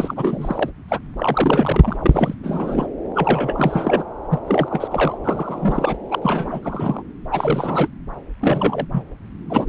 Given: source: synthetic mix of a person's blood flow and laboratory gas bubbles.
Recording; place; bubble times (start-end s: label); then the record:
Doppler ultrasound of blood flow; subclavian vein
0.00-0.69 s: bubbles
0.88-0.99 s: bubbles
1.17-1.96 s: bubbles
2.02-2.34 s: bubbles
2.44-2.87 s: bubbles
3.15-4.04 s: bubbles
4.31-4.39 s: bubbles
4.46-4.88 s: bubbles
4.91-5.17 s: bubbles
5.24-5.98 s: bubbles
6.11-6.19 s: bubbles
6.21-6.59 s: bubbles
6.62-7.03 s: bubbles
7.32-7.89 s: bubbles
8.40-8.85 s: bubbles
8.91-9.03 s: bubbles
9.49-9.66 s: bubbles
From the record:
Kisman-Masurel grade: 342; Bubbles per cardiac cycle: rolling drumbeat, 9 or more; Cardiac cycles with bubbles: 100%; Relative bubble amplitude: moderate (0.250 to 0.450); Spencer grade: 3 (all of the cardiac periods contain showers or single bubble signals, but not dominating or overriding the cardiac motion signals); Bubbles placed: anywhere in the cardiac cycle